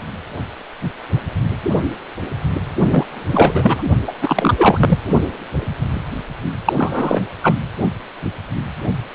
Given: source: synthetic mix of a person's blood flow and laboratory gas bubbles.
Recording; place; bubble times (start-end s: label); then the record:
Doppler ultrasound of blood flow; precordium
2.90-3.82 s: bubbles
4.07-4.12 s: bubbles
4.21-4.98 s: bubbles
6.65-6.73 s: bubbles
6.76-7.21 s: bubbles
7.42-7.54 s: bubbles
From the record:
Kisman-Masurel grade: 223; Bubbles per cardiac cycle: several, 3 to 8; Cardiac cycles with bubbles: 10 to 50%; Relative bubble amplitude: loud (0.450 to 0.775); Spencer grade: 2 (many but less than half of the cardiac periods contain bubble signals, singularly or in groups); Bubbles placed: only in the low amplitude regions of the cardiac cycle